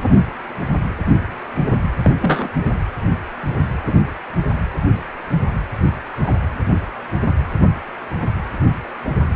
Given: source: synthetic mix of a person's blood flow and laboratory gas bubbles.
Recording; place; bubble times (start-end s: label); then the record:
Doppler ultrasound of blood flow; precordium
2.04-2.11 s: bubbles
2.22-2.48 s: bubbles
3.87-3.93 s: bubbles
6.22-6.33 s: bubbles
From the record:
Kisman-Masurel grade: 123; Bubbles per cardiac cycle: 1 to 2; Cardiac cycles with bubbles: 10 to 50%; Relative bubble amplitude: loud (0.450 to 0.775); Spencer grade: 2 (many but less than half of the cardiac periods contain bubble signals, singularly or in groups); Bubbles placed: anywhere in the cardiac cycle